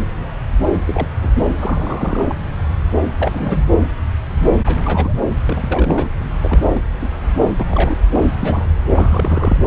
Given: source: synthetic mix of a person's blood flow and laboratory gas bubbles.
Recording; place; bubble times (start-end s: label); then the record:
Doppler ultrasound of blood flow; subclavian vein
0.86-1.08 s: bubbles
1.21-1.32 s: bubbles
1.36-1.45 s: bubbles
1.60-2.40 s: bubbles
3.17-3.68 s: bubbles
4.66-5.19 s: bubbles
5.46-6.10 s: bubbles
6.41-6.81 s: bubbles
7.01-7.10 s: bubbles
7.60-7.98 s: bubbles
8.21-8.29 s: bubbles
8.39-8.68 s: bubbles
8.94-9.63 s: bubbles
From the record:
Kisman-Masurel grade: 232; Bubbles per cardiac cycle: several, 3 to 8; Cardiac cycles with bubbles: 50 to 99%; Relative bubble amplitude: moderate (0.250 to 0.450); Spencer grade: 3 (all of the cardiac periods contain showers or single bubble signals, but not dominating or overriding the cardiac motion signals); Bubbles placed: anywhere in the cardiac cycle